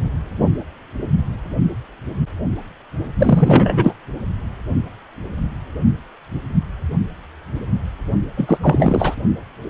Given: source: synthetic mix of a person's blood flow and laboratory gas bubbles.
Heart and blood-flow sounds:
Doppler ultrasound of blood flow; precordium
3.19-3.93 s: bubbles
8.36-8.58 s: bubbles
8.62-9.15 s: bubbles
From the record:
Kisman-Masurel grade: 223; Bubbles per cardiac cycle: several, 3 to 8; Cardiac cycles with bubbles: 10 to 50%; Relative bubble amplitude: loud (0.450 to 0.775); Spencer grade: 2 (many but less than half of the cardiac periods contain bubble signals, singularly or in groups); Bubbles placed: only in the low amplitude regions of the cardiac cycle

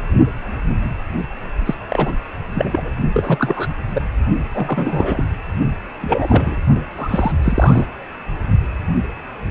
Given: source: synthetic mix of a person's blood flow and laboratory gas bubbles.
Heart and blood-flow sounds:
Doppler ultrasound of blood flow; precordium
1.65-1.74 s: bubbles
1.88-2.12 s: bubbles
2.54-2.88 s: bubbles
3.13-3.68 s: bubbles
3.94-4.02 s: bubbles
4.52-5.25 s: bubbles
6.01-6.58 s: bubbles
6.97-7.33 s: bubbles
7.43-7.88 s: bubbles
From the record:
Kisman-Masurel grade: 332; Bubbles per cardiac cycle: rolling drumbeat, 9 or more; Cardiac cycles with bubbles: 50 to 99%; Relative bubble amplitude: moderate (0.250 to 0.450); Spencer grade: 3 (all of the cardiac periods contain showers or single bubble signals, but not dominating or overriding the cardiac motion signals); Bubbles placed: only in the low amplitude regions of the cardiac cycle

